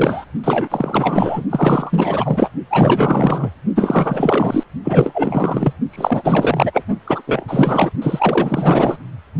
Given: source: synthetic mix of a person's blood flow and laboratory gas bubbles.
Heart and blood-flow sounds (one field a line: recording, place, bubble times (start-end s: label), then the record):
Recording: Doppler ultrasound of blood flow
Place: precordium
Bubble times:
0.00-0.25 s: bubbles
0.44-1.44 s: bubbles
1.49-2.51 s: bubbles
2.70-3.50 s: bubbles
3.75-4.64 s: bubbles
4.84-5.73 s: bubbles
5.90-6.83 s: bubbles
7.07-7.21 s: bubbles
7.27-7.45 s: bubbles
7.48-7.91 s: bubbles
8.02-8.97 s: bubbles
From the record:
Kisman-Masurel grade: 444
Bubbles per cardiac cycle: continuous sound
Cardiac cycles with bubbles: 100%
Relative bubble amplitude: maximal (0.775 to 0.999)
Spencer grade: 4 (maximum detectable bubble signal sounding continuously throughout systole and diastole of every cardiac period, and overriding the amplitude of the normal cardiac signals)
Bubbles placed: only in the low amplitude regions of the cardiac cycle